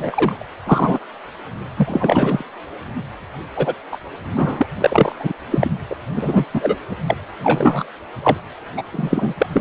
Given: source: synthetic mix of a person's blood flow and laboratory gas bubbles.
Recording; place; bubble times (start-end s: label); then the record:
Doppler ultrasound of blood flow; precordium
0.00-0.46 s: bubbles
0.66-0.99 s: bubbles
1.77-2.44 s: bubbles
3.57-3.75 s: bubbles
3.92-3.97 s: bubbles
4.37-4.67 s: bubbles
4.80-5.16 s: bubbles
5.20-5.33 s: bubbles
5.51-5.70 s: bubbles
5.89-5.96 s: bubbles
6.16-6.45 s: bubbles
6.54-6.76 s: bubbles
7.07-7.17 s: bubbles
7.43-7.84 s: bubbles
8.22-8.37 s: bubbles
8.77-8.82 s: bubbles
8.91-9.34 s: bubbles
9.38-9.46 s: bubbles
9.52-9.61 s: bubbles
From the record:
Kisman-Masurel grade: 243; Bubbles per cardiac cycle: several, 3 to 8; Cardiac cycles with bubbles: 100%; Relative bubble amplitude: loud (0.450 to 0.775); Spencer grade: 3 (all of the cardiac periods contain showers or single bubble signals, but not dominating or overriding the cardiac motion signals); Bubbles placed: anywhere in the cardiac cycle